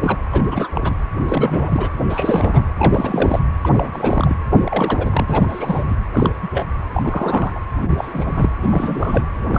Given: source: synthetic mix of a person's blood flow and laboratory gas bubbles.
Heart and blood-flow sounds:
Doppler ultrasound of blood flow; precordium
0.00-0.18 s: bubbles
0.32-0.68 s: bubbles
0.74-0.94 s: bubbles
1.25-1.89 s: bubbles
2.09-2.66 s: bubbles
2.77-3.43 s: bubbles
3.61-4.36 s: bubbles
4.49-5.84 s: bubbles
5.88-5.96 s: bubbles
6.12-6.30 s: bubbles
6.42-6.48 s: bubbles
6.53-6.65 s: bubbles
6.92-7.59 s: bubbles
7.81-7.91 s: bubbles
7.97-8.52 s: bubbles
8.62-9.25 s: bubbles
9.48-9.59 s: bubbles
From the record:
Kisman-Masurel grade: 342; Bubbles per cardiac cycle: rolling drumbeat, 9 or more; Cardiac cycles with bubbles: 100%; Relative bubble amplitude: moderate (0.250 to 0.450); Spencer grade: 3 (all of the cardiac periods contain showers or single bubble signals, but not dominating or overriding the cardiac motion signals); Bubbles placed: anywhere in the cardiac cycle

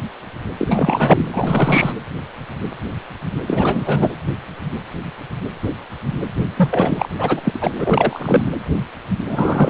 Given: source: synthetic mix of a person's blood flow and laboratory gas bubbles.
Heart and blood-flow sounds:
Doppler ultrasound of blood flow; precordium
0.58-1.28 s: bubbles
1.33-1.92 s: bubbles
3.47-4.12 s: bubbles
6.56-7.09 s: bubbles
7.18-7.41 s: bubbles
7.44-8.46 s: bubbles
9.28-9.69 s: bubbles
From the record:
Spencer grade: 3 (all of the cardiac periods contain showers or single bubble signals, but not dominating or overriding the cardiac motion signals); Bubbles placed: anywhere in the cardiac cycle

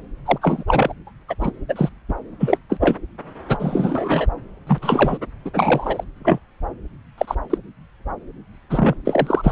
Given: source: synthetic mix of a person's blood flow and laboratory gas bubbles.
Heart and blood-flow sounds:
Doppler ultrasound of blood flow; subclavian vein
0.26-0.38 s: bubbles
0.41-0.64 s: bubbles
0.68-0.93 s: bubbles
1.06-1.11 s: bubbles
1.28-1.34 s: bubbles
1.41-1.50 s: bubbles
1.69-1.89 s: bubbles
2.08-2.14 s: bubbles
2.40-2.57 s: bubbles
2.69-2.96 s: bubbles
3.49-3.57 s: bubbles
3.59-4.27 s: bubbles
4.67-4.79 s: bubbles
4.82-5.18 s: bubbles
5.45-5.51 s: bubbles
5.55-6.04 s: bubbles
6.24-6.40 s: bubbles
7.18-7.35 s: bubbles
7.50-7.58 s: bubbles
8.70-8.94 s: bubbles
9.05-9.52 s: bubbles
From the record:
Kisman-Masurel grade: 243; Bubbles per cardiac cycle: several, 3 to 8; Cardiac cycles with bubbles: 100%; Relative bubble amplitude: loud (0.450 to 0.775); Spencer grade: 3 (all of the cardiac periods contain showers or single bubble signals, but not dominating or overriding the cardiac motion signals); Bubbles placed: anywhere in the cardiac cycle

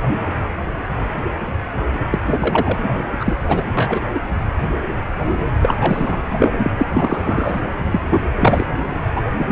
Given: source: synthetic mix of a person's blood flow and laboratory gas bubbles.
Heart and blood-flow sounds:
Doppler ultrasound of blood flow; precordium
2.12-2.19 s: bubbles
2.25-2.90 s: bubbles
3.20-3.36 s: bubbles
3.48-3.71 s: bubbles
3.75-4.01 s: bubbles
4.14-4.20 s: bubbles
5.62-6.20 s: bubbles
6.39-6.53 s: bubbles
6.63-6.71 s: bubbles
6.78-6.86 s: bubbles
6.93-7.62 s: bubbles
7.92-8.02 s: bubbles
8.11-8.22 s: bubbles
8.40-8.66 s: bubbles
9.15-9.24 s: bubbles
9.39-9.52 s: bubbles
From the record:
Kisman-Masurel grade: 333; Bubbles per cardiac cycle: rolling drumbeat, 9 or more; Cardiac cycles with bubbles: 50 to 99%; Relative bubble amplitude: loud (0.450 to 0.775); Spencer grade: 3 (all of the cardiac periods contain showers or single bubble signals, but not dominating or overriding the cardiac motion signals); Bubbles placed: anywhere in the cardiac cycle

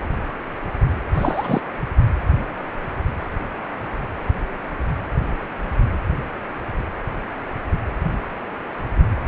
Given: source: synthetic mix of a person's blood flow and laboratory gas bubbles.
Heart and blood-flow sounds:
Doppler ultrasound of blood flow; precordium
1.14-1.61 s: bubbles
From the record:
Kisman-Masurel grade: 212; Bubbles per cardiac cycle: several, 3 to 8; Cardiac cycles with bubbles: 1 to 10%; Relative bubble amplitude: moderate (0.250 to 0.450); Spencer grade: 1 (occasional bubble signal discernible with the cardiac motion signal, with majority of cardiac periods free of bubbles); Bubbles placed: anywhere in the cardiac cycle

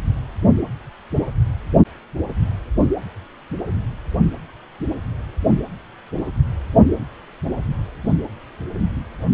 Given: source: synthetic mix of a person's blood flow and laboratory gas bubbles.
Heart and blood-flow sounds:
Doppler ultrasound of blood flow; precordium
no bubbles
From the record:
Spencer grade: 0 (complete lack of bubble signals)

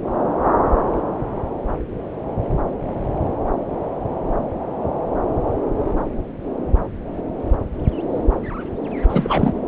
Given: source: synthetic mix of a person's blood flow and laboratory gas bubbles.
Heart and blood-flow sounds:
Doppler ultrasound of blood flow; subclavian vein
9.08-9.52 s: bubbles
From the record:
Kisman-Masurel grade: 213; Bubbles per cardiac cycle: several, 3 to 8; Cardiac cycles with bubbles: 1 to 10%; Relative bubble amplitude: loud (0.450 to 0.775); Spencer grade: 1 (occasional bubble signal discernible with the cardiac motion signal, with majority of cardiac periods free of bubbles); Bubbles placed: anywhere in the cardiac cycle

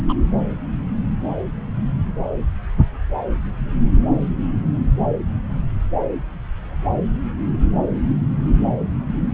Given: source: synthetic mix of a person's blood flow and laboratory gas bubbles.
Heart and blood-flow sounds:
Doppler ultrasound of blood flow; subclavian vein
0.09-0.14 s: bubbles
From the record:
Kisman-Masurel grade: 113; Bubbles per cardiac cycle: 1 to 2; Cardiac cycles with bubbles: 1 to 10%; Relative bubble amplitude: loud (0.450 to 0.775); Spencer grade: 1 (occasional bubble signal discernible with the cardiac motion signal, with majority of cardiac periods free of bubbles); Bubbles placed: anywhere in the cardiac cycle

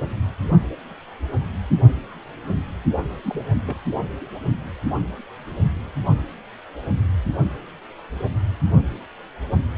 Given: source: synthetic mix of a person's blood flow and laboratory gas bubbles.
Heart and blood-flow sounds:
Doppler ultrasound of blood flow; precordium
3.23-3.45 s: bubbles
3.65-3.77 s: bubbles
From the record:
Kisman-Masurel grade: 111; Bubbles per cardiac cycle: 1 to 2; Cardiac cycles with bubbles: 1 to 10%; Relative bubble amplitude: barely perceptible (0.100 to 0.250); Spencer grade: 1 (occasional bubble signal discernible with the cardiac motion signal, with majority of cardiac periods free of bubbles); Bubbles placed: anywhere in the cardiac cycle

